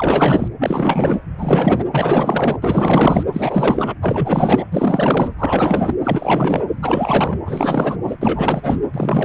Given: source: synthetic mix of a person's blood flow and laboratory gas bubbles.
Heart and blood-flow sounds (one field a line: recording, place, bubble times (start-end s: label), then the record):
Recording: Doppler ultrasound of blood flow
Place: precordium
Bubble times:
0.00-0.48 s: bubbles
0.59-1.24 s: bubbles
1.38-1.84 s: bubbles
1.92-2.58 s: bubbles
2.62-3.23 s: bubbles
3.32-3.94 s: bubbles
4.01-4.64 s: bubbles
4.71-5.33 s: bubbles
5.38-5.95 s: bubbles
6.04-6.63 s: bubbles
6.82-7.37 s: bubbles
7.45-7.97 s: bubbles
8.07-8.16 s: bubbles
8.21-8.79 s: bubbles
8.93-9.25 s: bubbles
From the record:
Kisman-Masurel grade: 444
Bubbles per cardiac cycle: continuous sound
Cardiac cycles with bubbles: 100%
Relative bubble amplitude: maximal (0.775 to 0.999)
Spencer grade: 4 (maximum detectable bubble signal sounding continuously throughout systole and diastole of every cardiac period, and overriding the amplitude of the normal cardiac signals)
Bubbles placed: anywhere in the cardiac cycle